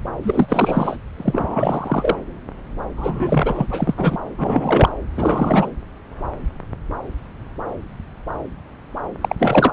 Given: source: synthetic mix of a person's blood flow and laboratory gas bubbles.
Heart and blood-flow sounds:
Doppler ultrasound of blood flow; subclavian vein
0.23-0.96 s: bubbles
1.17-2.15 s: bubbles
2.97-3.66 s: bubbles
3.70-3.94 s: bubbles
3.97-4.18 s: bubbles
4.38-4.89 s: bubbles
5.15-5.70 s: bubbles
9.21-9.36 s: bubbles
9.39-9.73 s: bubbles
From the record:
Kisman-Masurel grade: 332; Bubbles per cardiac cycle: rolling drumbeat, 9 or more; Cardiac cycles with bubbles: 50 to 99%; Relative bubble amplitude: moderate (0.250 to 0.450); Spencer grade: 3 (all of the cardiac periods contain showers or single bubble signals, but not dominating or overriding the cardiac motion signals); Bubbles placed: anywhere in the cardiac cycle

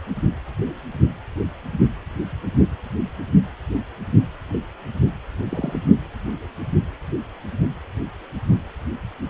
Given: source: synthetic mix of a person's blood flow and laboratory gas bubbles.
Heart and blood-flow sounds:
Doppler ultrasound of blood flow; precordium
5.49-5.80 s: bubbles
From the record:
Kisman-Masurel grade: 121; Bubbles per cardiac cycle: 1 to 2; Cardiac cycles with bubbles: 10 to 50%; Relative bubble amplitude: barely perceptible (0.100 to 0.250); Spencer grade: 2 (many but less than half of the cardiac periods contain bubble signals, singularly or in groups); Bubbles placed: only in the low amplitude regions of the cardiac cycle

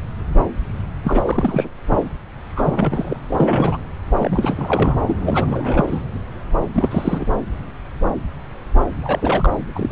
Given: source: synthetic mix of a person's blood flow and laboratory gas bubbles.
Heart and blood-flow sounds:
Doppler ultrasound of blood flow; subclavian vein
1.03-1.68 s: bubbles
2.56-3.17 s: bubbles
3.29-3.79 s: bubbles
4.17-4.96 s: bubbles
5.07-6.03 s: bubbles
6.74-7.27 s: bubbles
9.01-9.50 s: bubbles
9.75-9.91 s: bubbles
From the record:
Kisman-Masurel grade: 332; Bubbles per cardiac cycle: rolling drumbeat, 9 or more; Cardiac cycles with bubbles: 50 to 99%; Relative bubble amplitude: moderate (0.250 to 0.450); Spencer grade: 3 (all of the cardiac periods contain showers or single bubble signals, but not dominating or overriding the cardiac motion signals); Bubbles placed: anywhere in the cardiac cycle

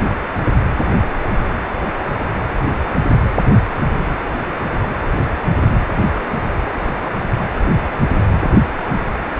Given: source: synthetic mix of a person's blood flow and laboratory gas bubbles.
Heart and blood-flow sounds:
Doppler ultrasound of blood flow; precordium
no bubbles
From the record:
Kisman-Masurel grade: 000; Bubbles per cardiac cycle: 0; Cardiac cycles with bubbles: 0%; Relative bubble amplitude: no bubbles discernible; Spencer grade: 0 (complete lack of bubble signals)

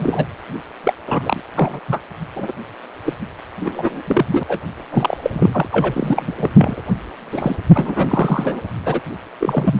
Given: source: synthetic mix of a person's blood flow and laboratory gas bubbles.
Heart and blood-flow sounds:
Doppler ultrasound of blood flow; precordium
0.00-0.25 s: bubbles
0.83-0.93 s: bubbles
1.06-1.40 s: bubbles
1.56-1.79 s: bubbles
1.88-1.99 s: bubbles
2.35-2.52 s: bubbles
3.05-3.14 s: bubbles
3.60-4.02 s: bubbles
4.06-4.25 s: bubbles
4.30-4.43 s: bubbles
4.47-4.59 s: bubbles
4.92-5.17 s: bubbles
5.22-5.67 s: bubbles
5.71-6.33 s: bubbles
6.37-6.50 s: bubbles
6.58-6.81 s: bubbles
7.31-7.56 s: bubbles
7.73-8.61 s: bubbles
8.86-9.00 s: bubbles
9.40-9.80 s: bubbles
From the record:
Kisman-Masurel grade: 343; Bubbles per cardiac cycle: rolling drumbeat, 9 or more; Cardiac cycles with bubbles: 100%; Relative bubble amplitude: loud (0.450 to 0.775); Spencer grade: 3 (all of the cardiac periods contain showers or single bubble signals, but not dominating or overriding the cardiac motion signals); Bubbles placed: anywhere in the cardiac cycle

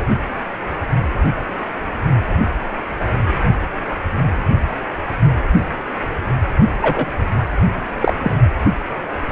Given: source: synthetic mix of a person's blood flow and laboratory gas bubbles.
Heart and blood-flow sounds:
Doppler ultrasound of blood flow; precordium
6.82-7.08 s: bubbles
8.00-8.13 s: bubbles
8.23-8.35 s: bubbles
From the record:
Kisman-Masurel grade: 213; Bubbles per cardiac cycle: several, 3 to 8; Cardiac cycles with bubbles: 1 to 10%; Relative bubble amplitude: loud (0.450 to 0.775); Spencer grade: 1 (occasional bubble signal discernible with the cardiac motion signal, with majority of cardiac periods free of bubbles); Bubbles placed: only in the low amplitude regions of the cardiac cycle

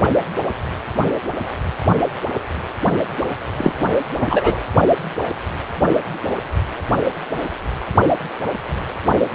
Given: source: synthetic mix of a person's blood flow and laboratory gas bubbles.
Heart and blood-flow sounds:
Doppler ultrasound of blood flow; precordium
3.57-3.73 s: bubbles
4.19-4.60 s: bubbles
From the record:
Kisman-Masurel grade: 213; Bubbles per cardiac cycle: several, 3 to 8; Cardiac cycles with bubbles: 1 to 10%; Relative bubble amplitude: loud (0.450 to 0.775); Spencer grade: 1 (occasional bubble signal discernible with the cardiac motion signal, with majority of cardiac periods free of bubbles); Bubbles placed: only in the low amplitude regions of the cardiac cycle

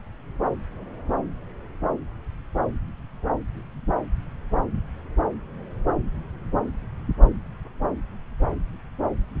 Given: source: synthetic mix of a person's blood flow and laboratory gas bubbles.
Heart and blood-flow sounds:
Doppler ultrasound of blood flow; subclavian vein
no bubbles
From the record:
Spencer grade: 0 (complete lack of bubble signals)

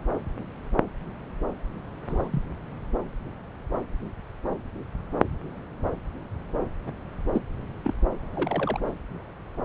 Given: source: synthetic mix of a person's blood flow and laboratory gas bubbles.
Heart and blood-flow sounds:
Doppler ultrasound of blood flow; subclavian vein
2.08-2.45 s: bubbles
6.86-6.92 s: bubbles
7.32-7.41 s: bubbles
7.84-7.94 s: bubbles
8.35-8.80 s: bubbles
From the record:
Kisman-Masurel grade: 121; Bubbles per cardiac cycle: 1 to 2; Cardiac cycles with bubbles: 10 to 50%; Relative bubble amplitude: barely perceptible (0.100 to 0.250); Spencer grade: 2 (many but less than half of the cardiac periods contain bubble signals, singularly or in groups); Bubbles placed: anywhere in the cardiac cycle

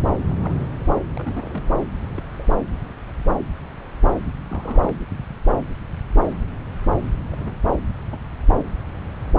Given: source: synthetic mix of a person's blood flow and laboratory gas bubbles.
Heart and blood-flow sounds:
Doppler ultrasound of blood flow; subclavian vein
0.27-0.54 s: bubbles
1.17-1.67 s: bubbles
2.17-2.21 s: bubbles
2.36-2.49 s: bubbles
4.48-4.93 s: bubbles
7.30-7.56 s: bubbles
8.07-8.17 s: bubbles
From the record:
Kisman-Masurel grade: 121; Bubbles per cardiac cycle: 1 to 2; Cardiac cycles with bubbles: 10 to 50%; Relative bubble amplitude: barely perceptible (0.100 to 0.250); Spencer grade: 2 (many but less than half of the cardiac periods contain bubble signals, singularly or in groups); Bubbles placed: anywhere in the cardiac cycle

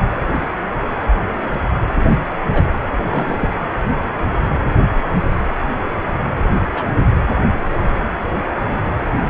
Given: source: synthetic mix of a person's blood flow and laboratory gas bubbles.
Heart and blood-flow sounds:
Doppler ultrasound of blood flow; precordium
2.53-2.63 s: bubbles
3.05-3.48 s: bubbles
6.69-6.88 s: bubbles
6.98-7.08 s: bubbles
8.68-8.79 s: bubbles
9.12-9.29 s: bubbles
From the record:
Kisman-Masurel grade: 122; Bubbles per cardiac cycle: 1 to 2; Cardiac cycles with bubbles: 10 to 50%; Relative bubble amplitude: moderate (0.250 to 0.450); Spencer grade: 2 (many but less than half of the cardiac periods contain bubble signals, singularly or in groups); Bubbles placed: anywhere in the cardiac cycle

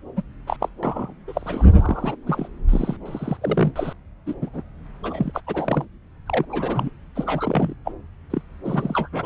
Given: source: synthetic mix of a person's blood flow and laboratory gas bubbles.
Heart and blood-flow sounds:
Doppler ultrasound of blood flow; subclavian vein
0.16-0.22 s: bubbles
0.46-0.56 s: bubbles
0.60-0.69 s: bubbles
0.82-1.14 s: bubbles
1.27-1.65 s: bubbles
1.70-2.16 s: bubbles
2.27-2.48 s: bubbles
2.69-2.96 s: bubbles
3.06-3.37 s: bubbles
3.42-3.72 s: bubbles
3.76-3.93 s: bubbles
4.26-4.34 s: bubbles
4.41-4.49 s: bubbles
4.53-4.63 s: bubbles
5.03-5.31 s: bubbles
5.34-5.40 s: bubbles
5.46-5.85 s: bubbles
6.28-6.45 s: bubbles
6.49-6.89 s: bubbles
7.15-7.74 s: bubbles
7.86-7.91 s: bubbles
8.30-8.41 s: bubbles
8.64-9.08 s: bubbles
9.12-9.25 s: bubbles
From the record:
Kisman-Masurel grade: 242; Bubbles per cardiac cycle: several, 3 to 8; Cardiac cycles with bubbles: 100%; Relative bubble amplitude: moderate (0.250 to 0.450); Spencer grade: 3 (all of the cardiac periods contain showers or single bubble signals, but not dominating or overriding the cardiac motion signals); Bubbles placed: anywhere in the cardiac cycle

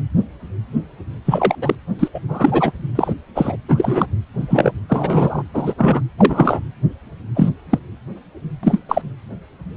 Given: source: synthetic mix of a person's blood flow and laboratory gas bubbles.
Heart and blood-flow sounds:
Doppler ultrasound of blood flow; precordium
1.25-1.55 s: bubbles
1.61-1.75 s: bubbles
1.99-2.08 s: bubbles
2.14-2.21 s: bubbles
2.28-2.72 s: bubbles
2.95-3.13 s: bubbles
3.35-3.56 s: bubbles
3.69-4.06 s: bubbles
4.40-4.71 s: bubbles
4.88-5.42 s: bubbles
5.54-5.74 s: bubbles
5.77-6.00 s: bubbles
6.17-6.60 s: bubbles
7.34-7.50 s: bubbles
7.70-7.79 s: bubbles
8.63-8.80 s: bubbles
8.88-9.01 s: bubbles
From the record:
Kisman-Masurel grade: 233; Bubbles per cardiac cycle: several, 3 to 8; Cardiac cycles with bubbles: 50 to 99%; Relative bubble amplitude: loud (0.450 to 0.775); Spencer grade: 3 (all of the cardiac periods contain showers or single bubble signals, but not dominating or overriding the cardiac motion signals); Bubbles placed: anywhere in the cardiac cycle

